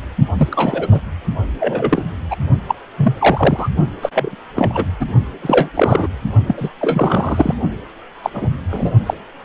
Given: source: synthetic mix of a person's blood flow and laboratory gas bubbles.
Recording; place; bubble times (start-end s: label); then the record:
Doppler ultrasound of blood flow; precordium
0.37-0.48 s: bubbles
0.51-0.88 s: bubbles
0.91-1.00 s: bubbles
1.59-2.03 s: bubbles
2.30-2.36 s: bubbles
2.68-2.75 s: bubbles
2.97-3.69 s: bubbles
4.02-4.10 s: bubbles
4.14-4.35 s: bubbles
4.56-4.85 s: bubbles
5.00-5.06 s: bubbles
5.42-5.69 s: bubbles
5.74-6.08 s: bubbles
6.46-6.69 s: bubbles
6.81-7.54 s: bubbles
8.23-8.30 s: bubbles
8.33-8.48 s: bubbles
8.70-8.90 s: bubbles
9.06-9.14 s: bubbles
From the record:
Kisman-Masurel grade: 243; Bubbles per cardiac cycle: several, 3 to 8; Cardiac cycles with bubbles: 100%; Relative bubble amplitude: loud (0.450 to 0.775); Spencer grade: 3 (all of the cardiac periods contain showers or single bubble signals, but not dominating or overriding the cardiac motion signals); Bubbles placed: only in the low amplitude regions of the cardiac cycle